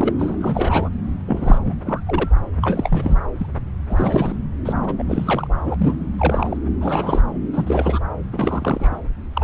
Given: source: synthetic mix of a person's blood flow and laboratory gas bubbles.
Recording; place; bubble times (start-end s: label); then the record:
Doppler ultrasound of blood flow; subclavian vein
0.00-0.13 s: bubbles
0.18-0.90 s: bubbles
1.25-1.58 s: bubbles
1.65-1.76 s: bubbles
1.84-2.01 s: bubbles
2.06-2.29 s: bubbles
2.62-3.18 s: bubbles
3.39-3.47 s: bubbles
3.90-4.36 s: bubbles
4.65-4.73 s: bubbles
4.82-4.96 s: bubbles
4.98-5.03 s: bubbles
5.08-5.47 s: bubbles
5.53-5.75 s: bubbles
5.77-5.96 s: bubbles
6.17-6.57 s: bubbles
6.80-7.21 s: bubbles
7.53-7.99 s: bubbles
8.32-8.97 s: bubbles
9.33-9.44 s: bubbles
From the record:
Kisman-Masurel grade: 342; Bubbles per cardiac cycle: rolling drumbeat, 9 or more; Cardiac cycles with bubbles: 100%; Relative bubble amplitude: moderate (0.250 to 0.450); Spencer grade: 3 (all of the cardiac periods contain showers or single bubble signals, but not dominating or overriding the cardiac motion signals); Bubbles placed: anywhere in the cardiac cycle